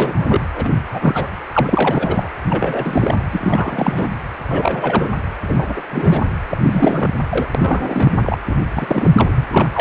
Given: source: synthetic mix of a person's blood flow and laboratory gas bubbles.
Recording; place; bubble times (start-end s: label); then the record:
Doppler ultrasound of blood flow; precordium
0.00-0.40 s: bubbles
0.55-0.72 s: bubbles
0.91-1.29 s: bubbles
1.53-2.29 s: bubbles
2.49-3.17 s: bubbles
3.31-4.08 s: bubbles
4.49-5.09 s: bubbles
5.47-5.81 s: bubbles
5.91-6.21 s: bubbles
6.50-7.23 s: bubbles
7.29-7.48 s: bubbles
7.54-8.36 s: bubbles
8.50-8.56 s: bubbles
8.76-9.45 s: bubbles
9.51-9.69 s: bubbles
9.72-9.81 s: bubbles
From the record:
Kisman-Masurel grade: 342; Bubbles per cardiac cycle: rolling drumbeat, 9 or more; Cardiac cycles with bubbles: 100%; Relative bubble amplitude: moderate (0.250 to 0.450); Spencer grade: 3 (all of the cardiac periods contain showers or single bubble signals, but not dominating or overriding the cardiac motion signals); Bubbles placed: anywhere in the cardiac cycle